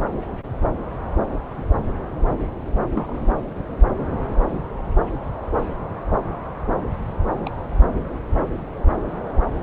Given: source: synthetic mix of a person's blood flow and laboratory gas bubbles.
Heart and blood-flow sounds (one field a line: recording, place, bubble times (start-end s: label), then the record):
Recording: Doppler ultrasound of blood flow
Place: subclavian vein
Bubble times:
2.94-3.30 s: bubbles
7.45-7.50 s: bubbles
From the record:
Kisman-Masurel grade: 111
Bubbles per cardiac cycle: 1 to 2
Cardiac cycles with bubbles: 1 to 10%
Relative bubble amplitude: barely perceptible (0.100 to 0.250)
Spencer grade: 1 (occasional bubble signal discernible with the cardiac motion signal, with majority of cardiac periods free of bubbles)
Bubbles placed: anywhere in the cardiac cycle